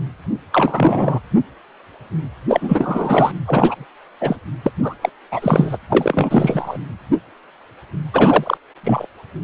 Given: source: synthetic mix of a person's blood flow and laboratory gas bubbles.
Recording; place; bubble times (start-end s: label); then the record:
Doppler ultrasound of blood flow; precordium
0.52-1.20 s: bubbles
2.48-3.31 s: bubbles
3.46-3.85 s: bubbles
4.21-4.36 s: bubbles
4.64-4.72 s: bubbles
4.82-4.95 s: bubbles
5.01-5.10 s: bubbles
5.32-5.77 s: bubbles
5.90-6.79 s: bubbles
8.12-8.58 s: bubbles
8.83-9.06 s: bubbles
From the record:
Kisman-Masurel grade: 333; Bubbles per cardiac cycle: rolling drumbeat, 9 or more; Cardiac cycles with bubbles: 50 to 99%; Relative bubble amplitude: loud (0.450 to 0.775); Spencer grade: 3 (all of the cardiac periods contain showers or single bubble signals, but not dominating or overriding the cardiac motion signals); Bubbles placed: anywhere in the cardiac cycle